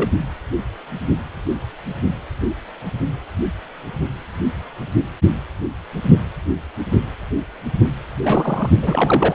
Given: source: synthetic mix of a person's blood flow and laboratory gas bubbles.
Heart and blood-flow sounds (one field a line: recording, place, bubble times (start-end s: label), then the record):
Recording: Doppler ultrasound of blood flow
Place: precordium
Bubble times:
0.00-0.09 s: bubbles
8.23-8.70 s: bubbles
8.82-9.35 s: bubbles
From the record:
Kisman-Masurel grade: 222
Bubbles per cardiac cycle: several, 3 to 8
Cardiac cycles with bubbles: 10 to 50%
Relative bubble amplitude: moderate (0.250 to 0.450)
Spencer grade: 2 (many but less than half of the cardiac periods contain bubble signals, singularly or in groups)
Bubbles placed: only in the low amplitude regions of the cardiac cycle